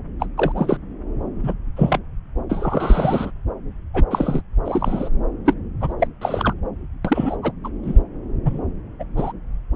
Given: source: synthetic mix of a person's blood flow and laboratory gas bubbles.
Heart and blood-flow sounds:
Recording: Doppler ultrasound of blood flow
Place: subclavian vein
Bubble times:
0.19-0.26 s: bubbles
0.38-0.52 s: bubbles
0.55-0.77 s: bubbles
1.43-1.53 s: bubbles
1.76-1.99 s: bubbles
2.49-3.32 s: bubbles
3.94-4.05 s: bubbles
4.11-4.41 s: bubbles
4.65-5.08 s: bubbles
5.46-5.54 s: bubbles
5.81-5.93 s: bubbles
6.00-6.07 s: bubbles
6.21-6.54 s: bubbles
7.04-7.37 s: bubbles
7.42-7.52 s: bubbles
7.64-7.69 s: bubbles
7.83-8.02 s: bubbles
8.45-8.61 s: bubbles
8.99-9.04 s: bubbles
9.17-9.32 s: bubbles
From the record:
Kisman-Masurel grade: 242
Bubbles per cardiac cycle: several, 3 to 8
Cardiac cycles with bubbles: 100%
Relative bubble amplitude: moderate (0.250 to 0.450)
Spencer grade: 3 (all of the cardiac periods contain showers or single bubble signals, but not dominating or overriding the cardiac motion signals)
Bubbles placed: anywhere in the cardiac cycle

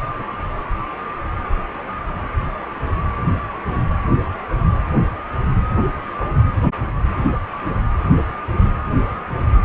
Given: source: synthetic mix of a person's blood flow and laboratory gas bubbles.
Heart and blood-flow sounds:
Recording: Doppler ultrasound of blood flow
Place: precordium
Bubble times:
3.67-3.83 s: bubbles
From the record:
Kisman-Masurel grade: 111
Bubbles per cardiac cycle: 1 to 2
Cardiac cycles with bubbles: 1 to 10%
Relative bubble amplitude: barely perceptible (0.100 to 0.250)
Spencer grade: 1 (occasional bubble signal discernible with the cardiac motion signal, with majority of cardiac periods free of bubbles)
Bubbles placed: anywhere in the cardiac cycle

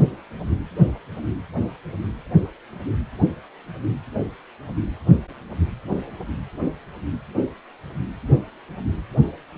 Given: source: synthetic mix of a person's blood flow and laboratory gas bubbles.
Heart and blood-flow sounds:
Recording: Doppler ultrasound of blood flow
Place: precordium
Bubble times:
no bubbles
From the record:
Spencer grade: 0 (complete lack of bubble signals)

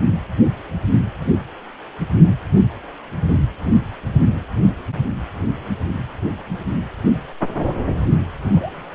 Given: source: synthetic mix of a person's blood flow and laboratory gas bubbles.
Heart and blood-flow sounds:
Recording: Doppler ultrasound of blood flow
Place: precordium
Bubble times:
8.51-8.85 s: bubbles
From the record:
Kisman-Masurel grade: 111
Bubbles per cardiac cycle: 1 to 2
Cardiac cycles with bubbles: 1 to 10%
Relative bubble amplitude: barely perceptible (0.100 to 0.250)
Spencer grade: 1 (occasional bubble signal discernible with the cardiac motion signal, with majority of cardiac periods free of bubbles)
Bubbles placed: only in the low amplitude regions of the cardiac cycle

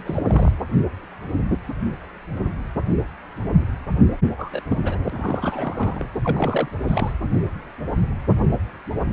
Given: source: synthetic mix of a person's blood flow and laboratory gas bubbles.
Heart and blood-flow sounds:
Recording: Doppler ultrasound of blood flow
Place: precordium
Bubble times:
0.00-0.51 s: bubbles
4.37-4.60 s: bubbles
4.70-4.97 s: bubbles
5.04-6.09 s: bubbles
6.24-6.68 s: bubbles
6.80-7.12 s: bubbles
From the record:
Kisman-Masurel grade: 221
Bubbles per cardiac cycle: several, 3 to 8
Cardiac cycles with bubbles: 10 to 50%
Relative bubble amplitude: barely perceptible (0.100 to 0.250)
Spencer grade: 2 (many but less than half of the cardiac periods contain bubble signals, singularly or in groups)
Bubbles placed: anywhere in the cardiac cycle

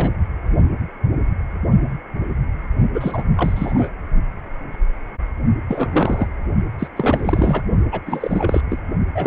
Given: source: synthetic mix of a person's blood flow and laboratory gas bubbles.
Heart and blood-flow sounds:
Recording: Doppler ultrasound of blood flow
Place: precordium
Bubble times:
0.00-0.10 s: bubbles
2.92-3.23 s: bubbles
3.36-3.90 s: bubbles
5.68-6.27 s: bubbles
6.79-6.88 s: bubbles
6.96-7.62 s: bubbles
7.92-8.00 s: bubbles
8.06-8.61 s: bubbles
8.70-8.78 s: bubbles
9.14-9.27 s: bubbles
From the record:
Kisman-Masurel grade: 332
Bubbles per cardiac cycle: rolling drumbeat, 9 or more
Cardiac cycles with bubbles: 50 to 99%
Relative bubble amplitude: moderate (0.250 to 0.450)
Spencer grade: 3 (all of the cardiac periods contain showers or single bubble signals, but not dominating or overriding the cardiac motion signals)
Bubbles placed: only in the low amplitude regions of the cardiac cycle

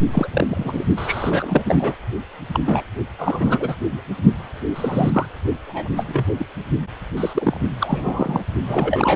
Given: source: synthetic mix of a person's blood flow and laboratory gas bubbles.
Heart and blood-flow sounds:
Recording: Doppler ultrasound of blood flow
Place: precordium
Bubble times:
0.12-0.28 s: bubbles
0.31-0.84 s: bubbles
0.96-1.95 s: bubbles
2.53-2.59 s: bubbles
2.65-2.83 s: bubbles
3.19-3.75 s: bubbles
3.91-4.01 s: bubbles
4.75-5.26 s: bubbles
5.67-5.88 s: bubbles
5.96-6.05 s: bubbles
6.08-6.24 s: bubbles
6.38-6.46 s: bubbles
7.17-7.60 s: bubbles
7.80-8.43 s: bubbles
8.67-9.16 s: bubbles
From the record:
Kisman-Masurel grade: 242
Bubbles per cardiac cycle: several, 3 to 8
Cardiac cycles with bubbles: 100%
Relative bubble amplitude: moderate (0.250 to 0.450)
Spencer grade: 3 (all of the cardiac periods contain showers or single bubble signals, but not dominating or overriding the cardiac motion signals)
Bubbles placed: only in the low amplitude regions of the cardiac cycle

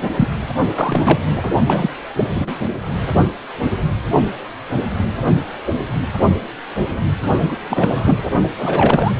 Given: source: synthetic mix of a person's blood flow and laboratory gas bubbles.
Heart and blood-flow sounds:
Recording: Doppler ultrasound of blood flow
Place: precordium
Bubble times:
0.17-0.28 s: bubbles
0.76-1.19 s: bubbles
1.30-1.50 s: bubbles
1.66-1.90 s: bubbles
2.16-2.25 s: bubbles
2.30-2.50 s: bubbles
7.47-7.58 s: bubbles
7.69-8.30 s: bubbles
8.58-9.12 s: bubbles
From the record:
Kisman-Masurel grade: 223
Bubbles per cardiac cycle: several, 3 to 8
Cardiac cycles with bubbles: 10 to 50%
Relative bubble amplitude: loud (0.450 to 0.775)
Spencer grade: 2 (many but less than half of the cardiac periods contain bubble signals, singularly or in groups)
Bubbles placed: only in the low amplitude regions of the cardiac cycle

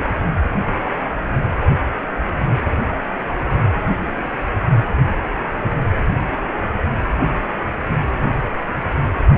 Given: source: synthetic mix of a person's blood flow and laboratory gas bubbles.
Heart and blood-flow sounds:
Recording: Doppler ultrasound of blood flow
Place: precordium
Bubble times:
no bubbles
From the record:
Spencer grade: 0 (complete lack of bubble signals)

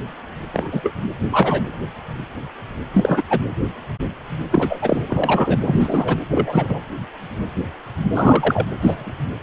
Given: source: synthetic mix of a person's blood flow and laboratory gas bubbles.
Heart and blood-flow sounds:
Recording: Doppler ultrasound of blood flow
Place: precordium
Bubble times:
0.53-0.93 s: bubbles
1.31-1.64 s: bubbles
2.93-3.21 s: bubbles
3.29-3.40 s: bubbles
4.50-5.02 s: bubbles
5.07-5.58 s: bubbles
5.66-6.17 s: bubbles
6.30-6.79 s: bubbles
8.14-8.65 s: bubbles
8.80-9.13 s: bubbles
From the record:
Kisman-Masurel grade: 233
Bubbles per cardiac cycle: several, 3 to 8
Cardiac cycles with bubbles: 50 to 99%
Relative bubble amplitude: loud (0.450 to 0.775)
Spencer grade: 3 (all of the cardiac periods contain showers or single bubble signals, but not dominating or overriding the cardiac motion signals)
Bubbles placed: anywhere in the cardiac cycle

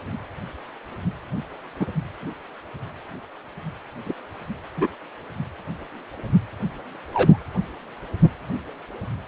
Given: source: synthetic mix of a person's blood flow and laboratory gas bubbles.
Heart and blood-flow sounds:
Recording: Doppler ultrasound of blood flow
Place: precordium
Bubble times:
1.79-1.87 s: bubbles
4.05-4.13 s: bubbles
4.76-4.88 s: bubbles
7.12-7.39 s: bubbles
From the record:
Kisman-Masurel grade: 123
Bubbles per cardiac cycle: 1 to 2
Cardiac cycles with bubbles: 10 to 50%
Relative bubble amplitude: loud (0.450 to 0.775)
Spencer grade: 2 (many but less than half of the cardiac periods contain bubble signals, singularly or in groups)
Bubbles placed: anywhere in the cardiac cycle

